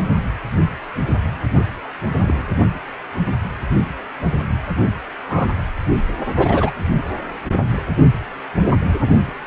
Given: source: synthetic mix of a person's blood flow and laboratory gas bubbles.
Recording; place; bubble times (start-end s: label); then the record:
Doppler ultrasound of blood flow; precordium
2.17-2.47 s: bubbles
5.29-5.48 s: bubbles
6.37-6.71 s: bubbles
From the record:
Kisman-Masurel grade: 122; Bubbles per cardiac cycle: 1 to 2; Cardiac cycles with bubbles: 10 to 50%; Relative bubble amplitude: moderate (0.250 to 0.450); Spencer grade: 2 (many but less than half of the cardiac periods contain bubble signals, singularly or in groups); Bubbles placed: anywhere in the cardiac cycle